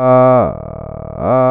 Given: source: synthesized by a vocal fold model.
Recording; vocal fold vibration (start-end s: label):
sustained vowel that changes in the middle
0.00-0.35 s: 128.1 Hz, open quotient 0.46
0.55-1.15 s: 38.5 Hz, open quotient 0.23
1.35-1.51 s: 128.1 Hz, open quotient 0.46